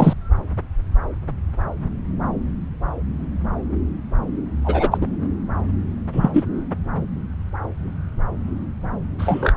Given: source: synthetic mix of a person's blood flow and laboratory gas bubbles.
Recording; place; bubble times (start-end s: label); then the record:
Doppler ultrasound of blood flow; subclavian vein
0.00-0.13 s: bubbles
4.64-4.98 s: bubbles
5.00-5.07 s: bubbles
6.12-6.44 s: bubbles
9.19-9.53 s: bubbles
From the record:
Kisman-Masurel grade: 223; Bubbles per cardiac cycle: several, 3 to 8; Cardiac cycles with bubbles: 10 to 50%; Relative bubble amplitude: loud (0.450 to 0.775); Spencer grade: 2 (many but less than half of the cardiac periods contain bubble signals, singularly or in groups); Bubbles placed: anywhere in the cardiac cycle